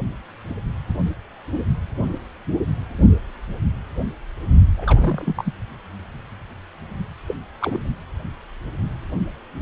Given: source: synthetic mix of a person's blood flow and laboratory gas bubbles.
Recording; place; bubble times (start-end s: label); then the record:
Doppler ultrasound of blood flow; precordium
4.76-5.54 s: bubbles
7.28-7.34 s: bubbles
7.59-7.83 s: bubbles
From the record:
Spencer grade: 2 (many but less than half of the cardiac periods contain bubble signals, singularly or in groups); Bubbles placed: only in the low amplitude regions of the cardiac cycle